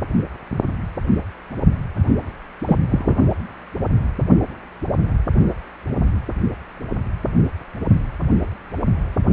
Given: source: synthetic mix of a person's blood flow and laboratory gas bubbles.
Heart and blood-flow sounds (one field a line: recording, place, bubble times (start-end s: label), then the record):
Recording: Doppler ultrasound of blood flow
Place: precordium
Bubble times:
2.66-2.77 s: bubbles
2.90-3.15 s: bubbles
From the record:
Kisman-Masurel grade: 113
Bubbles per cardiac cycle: 1 to 2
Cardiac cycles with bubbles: 1 to 10%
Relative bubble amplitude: loud (0.450 to 0.775)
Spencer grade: 1 (occasional bubble signal discernible with the cardiac motion signal, with majority of cardiac periods free of bubbles)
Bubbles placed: only in the low amplitude regions of the cardiac cycle